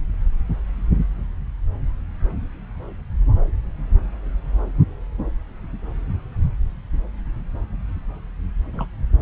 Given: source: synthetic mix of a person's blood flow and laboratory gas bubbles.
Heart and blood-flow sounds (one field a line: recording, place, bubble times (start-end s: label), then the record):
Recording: Doppler ultrasound of blood flow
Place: subclavian vein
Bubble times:
8.73-8.86 s: bubbles
From the record:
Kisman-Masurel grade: 111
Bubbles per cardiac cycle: 1 to 2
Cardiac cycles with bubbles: 1 to 10%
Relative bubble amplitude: barely perceptible (0.100 to 0.250)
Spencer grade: 1 (occasional bubble signal discernible with the cardiac motion signal, with majority of cardiac periods free of bubbles)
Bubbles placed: anywhere in the cardiac cycle